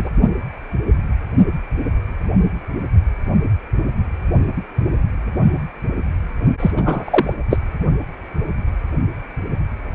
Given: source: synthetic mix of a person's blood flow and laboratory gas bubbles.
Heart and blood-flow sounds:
Doppler ultrasound of blood flow; precordium
0.00-0.10 s: bubbles
6.60-6.71 s: bubbles
6.76-7.34 s: bubbles
7.51-7.58 s: bubbles
From the record:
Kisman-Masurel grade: 223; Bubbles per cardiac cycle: several, 3 to 8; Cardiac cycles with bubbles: 10 to 50%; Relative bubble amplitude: loud (0.450 to 0.775); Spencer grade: 2 (many but less than half of the cardiac periods contain bubble signals, singularly or in groups); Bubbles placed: only in the low amplitude regions of the cardiac cycle

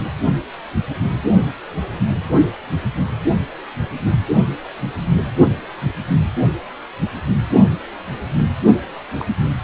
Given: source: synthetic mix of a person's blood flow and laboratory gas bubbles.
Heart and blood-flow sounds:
Doppler ultrasound of blood flow; precordium
9.18-9.26 s: bubbles
From the record:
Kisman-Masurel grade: 111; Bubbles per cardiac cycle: 1 to 2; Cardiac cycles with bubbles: 1 to 10%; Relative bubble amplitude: barely perceptible (0.100 to 0.250); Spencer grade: 1 (occasional bubble signal discernible with the cardiac motion signal, with majority of cardiac periods free of bubbles); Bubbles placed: only in the low amplitude regions of the cardiac cycle

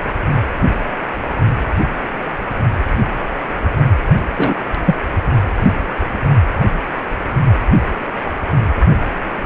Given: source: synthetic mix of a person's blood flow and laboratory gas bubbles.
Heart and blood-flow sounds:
Doppler ultrasound of blood flow; precordium
4.37-4.55 s: bubbles
4.85-4.96 s: bubbles
From the record:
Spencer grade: 1 (occasional bubble signal discernible with the cardiac motion signal, with majority of cardiac periods free of bubbles); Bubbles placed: anywhere in the cardiac cycle

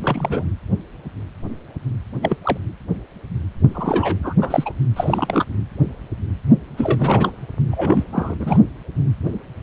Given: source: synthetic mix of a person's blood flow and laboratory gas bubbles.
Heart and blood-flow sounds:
Doppler ultrasound of blood flow; precordium
0.02-0.51 s: bubbles
2.22-2.37 s: bubbles
2.44-2.57 s: bubbles
3.74-4.17 s: bubbles
4.23-4.33 s: bubbles
4.41-4.72 s: bubbles
4.96-5.45 s: bubbles
6.77-7.32 s: bubbles
7.71-8.03 s: bubbles
8.12-8.35 s: bubbles
8.40-8.60 s: bubbles
From the record:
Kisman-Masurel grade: 232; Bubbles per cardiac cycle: several, 3 to 8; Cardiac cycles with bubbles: 50 to 99%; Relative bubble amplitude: moderate (0.250 to 0.450); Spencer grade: 3 (all of the cardiac periods contain showers or single bubble signals, but not dominating or overriding the cardiac motion signals); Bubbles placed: anywhere in the cardiac cycle

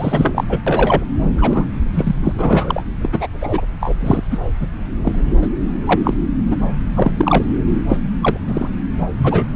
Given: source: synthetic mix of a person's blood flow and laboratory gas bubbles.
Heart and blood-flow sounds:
Doppler ultrasound of blood flow; subclavian vein
0.00-0.44 s: bubbles
0.49-0.58 s: bubbles
0.67-1.04 s: bubbles
1.38-1.65 s: bubbles
1.94-2.16 s: bubbles
2.23-2.32 s: bubbles
2.38-2.84 s: bubbles
3.01-3.09 s: bubbles
3.12-3.27 s: bubbles
3.41-3.61 s: bubbles
3.80-3.96 s: bubbles
4.00-4.21 s: bubbles
4.31-4.38 s: bubbles
4.60-4.67 s: bubbles
5.01-5.21 s: bubbles
5.42-5.47 s: bubbles
5.85-5.96 s: bubbles
6.04-6.14 s: bubbles
6.50-6.57 s: bubbles
6.95-7.14 s: bubbles
7.17-7.44 s: bubbles
7.89-7.98 s: bubbles
8.22-8.38 s: bubbles
8.48-8.69 s: bubbles
9.18-9.50 s: bubbles
From the record:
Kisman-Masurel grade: 243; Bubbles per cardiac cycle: several, 3 to 8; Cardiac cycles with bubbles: 100%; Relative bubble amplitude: loud (0.450 to 0.775); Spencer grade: 3 (all of the cardiac periods contain showers or single bubble signals, but not dominating or overriding the cardiac motion signals); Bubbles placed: anywhere in the cardiac cycle

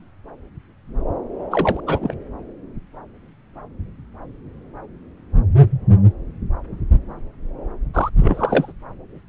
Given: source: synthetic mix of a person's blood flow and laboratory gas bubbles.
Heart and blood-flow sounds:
Doppler ultrasound of blood flow; subclavian vein
1.51-1.80 s: bubbles
1.86-2.14 s: bubbles
7.94-8.10 s: bubbles
8.16-8.72 s: bubbles
From the record:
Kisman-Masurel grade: 222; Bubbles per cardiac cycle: several, 3 to 8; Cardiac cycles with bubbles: 10 to 50%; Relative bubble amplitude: moderate (0.250 to 0.450); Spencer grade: 2 (many but less than half of the cardiac periods contain bubble signals, singularly or in groups); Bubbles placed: anywhere in the cardiac cycle

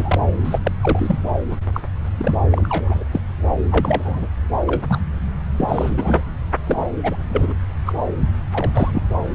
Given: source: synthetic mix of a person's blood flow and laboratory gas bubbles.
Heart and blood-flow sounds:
Doppler ultrasound of blood flow; subclavian vein
0.00-0.19 s: bubbles
0.44-0.59 s: bubbles
0.64-0.72 s: bubbles
0.81-1.19 s: bubbles
1.51-1.56 s: bubbles
1.73-1.81 s: bubbles
2.17-2.35 s: bubbles
2.52-3.04 s: bubbles
3.12-3.21 s: bubbles
3.71-4.28 s: bubbles
4.66-4.82 s: bubbles
4.88-5.00 s: bubbles
5.58-6.21 s: bubbles
6.63-6.89 s: bubbles
7.03-7.16 s: bubbles
7.33-7.53 s: bubbles
7.86-7.93 s: bubbles
8.52-8.71 s: bubbles
8.74-9.02 s: bubbles
From the record:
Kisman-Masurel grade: 242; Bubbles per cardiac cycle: several, 3 to 8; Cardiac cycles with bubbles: 100%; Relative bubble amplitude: moderate (0.250 to 0.450); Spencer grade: 3 (all of the cardiac periods contain showers or single bubble signals, but not dominating or overriding the cardiac motion signals); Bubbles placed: anywhere in the cardiac cycle

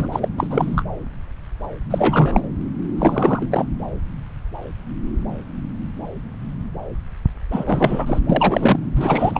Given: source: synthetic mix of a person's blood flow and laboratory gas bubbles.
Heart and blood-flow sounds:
Doppler ultrasound of blood flow; subclavian vein
0.00-0.09 s: bubbles
0.12-0.28 s: bubbles
0.37-0.82 s: bubbles
1.90-2.42 s: bubbles
2.96-3.47 s: bubbles
3.50-3.65 s: bubbles
7.51-8.19 s: bubbles
8.29-8.79 s: bubbles
8.96-9.40 s: bubbles
From the record:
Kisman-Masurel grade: 333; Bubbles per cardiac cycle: rolling drumbeat, 9 or more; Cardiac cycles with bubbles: 50 to 99%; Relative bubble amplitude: loud (0.450 to 0.775); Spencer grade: 3 (all of the cardiac periods contain showers or single bubble signals, but not dominating or overriding the cardiac motion signals); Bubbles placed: anywhere in the cardiac cycle

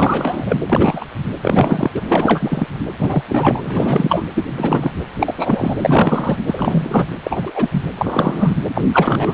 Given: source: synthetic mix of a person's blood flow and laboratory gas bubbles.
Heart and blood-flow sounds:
Doppler ultrasound of blood flow; precordium
0.00-0.57 s: bubbles
0.70-1.05 s: bubbles
1.42-1.92 s: bubbles
1.94-2.01 s: bubbles
2.08-2.67 s: bubbles
2.98-3.23 s: bubbles
3.29-4.25 s: bubbles
4.34-4.92 s: bubbles
5.20-5.76 s: bubbles
5.79-6.36 s: bubbles
6.46-7.08 s: bubbles
7.24-7.82 s: bubbles
7.98-8.56 s: bubbles
8.74-8.81 s: bubbles
8.93-9.34 s: bubbles
From the record:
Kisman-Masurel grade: 333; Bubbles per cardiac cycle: rolling drumbeat, 9 or more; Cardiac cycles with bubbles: 50 to 99%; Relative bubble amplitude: loud (0.450 to 0.775); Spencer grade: 3 (all of the cardiac periods contain showers or single bubble signals, but not dominating or overriding the cardiac motion signals); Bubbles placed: anywhere in the cardiac cycle

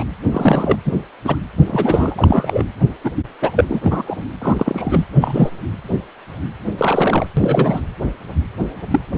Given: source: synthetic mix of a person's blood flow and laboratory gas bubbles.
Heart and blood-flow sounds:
Doppler ultrasound of blood flow; precordium
0.00-0.04 s: bubbles
0.32-0.77 s: bubbles
0.85-0.93 s: bubbles
1.25-1.36 s: bubbles
1.67-2.64 s: bubbles
3.04-3.11 s: bubbles
3.42-3.52 s: bubbles
3.56-3.65 s: bubbles
3.69-3.80 s: bubbles
3.83-4.24 s: bubbles
4.41-5.05 s: bubbles
5.20-5.49 s: bubbles
6.78-7.27 s: bubbles
7.37-7.81 s: bubbles
8.90-9.00 s: bubbles
From the record:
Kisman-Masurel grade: 233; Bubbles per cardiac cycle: several, 3 to 8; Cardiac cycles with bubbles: 50 to 99%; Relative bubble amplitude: loud (0.450 to 0.775); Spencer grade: 3 (all of the cardiac periods contain showers or single bubble signals, but not dominating or overriding the cardiac motion signals); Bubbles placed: anywhere in the cardiac cycle

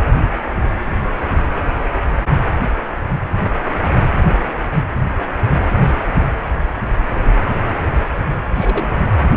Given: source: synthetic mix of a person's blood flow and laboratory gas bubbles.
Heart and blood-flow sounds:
Doppler ultrasound of blood flow; precordium
8.55-9.11 s: bubbles
From the record:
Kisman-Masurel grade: 211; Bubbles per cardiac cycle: several, 3 to 8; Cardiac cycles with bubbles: 1 to 10%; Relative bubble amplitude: barely perceptible (0.100 to 0.250); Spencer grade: 1 (occasional bubble signal discernible with the cardiac motion signal, with majority of cardiac periods free of bubbles); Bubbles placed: anywhere in the cardiac cycle

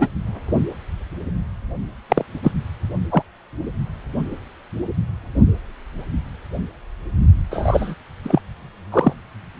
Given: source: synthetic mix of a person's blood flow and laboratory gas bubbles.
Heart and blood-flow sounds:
Doppler ultrasound of blood flow; precordium
0.00-0.08 s: bubbles
2.09-2.25 s: bubbles
2.44-2.52 s: bubbles
3.11-3.23 s: bubbles
7.50-7.94 s: bubbles
8.23-8.41 s: bubbles
8.92-9.13 s: bubbles
From the record:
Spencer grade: 2 (many but less than half of the cardiac periods contain bubble signals, singularly or in groups); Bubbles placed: only in the low amplitude regions of the cardiac cycle

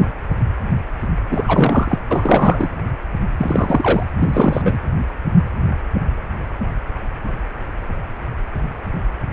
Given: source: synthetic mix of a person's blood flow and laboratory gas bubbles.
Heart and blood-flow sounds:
Doppler ultrasound of blood flow; precordium
1.30-1.98 s: bubbles
2.10-2.69 s: bubbles
3.38-4.04 s: bubbles
4.18-4.77 s: bubbles
From the record:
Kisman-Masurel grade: 223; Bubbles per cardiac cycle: several, 3 to 8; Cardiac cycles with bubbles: 10 to 50%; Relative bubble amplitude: loud (0.450 to 0.775); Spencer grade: 2 (many but less than half of the cardiac periods contain bubble signals, singularly or in groups); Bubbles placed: anywhere in the cardiac cycle

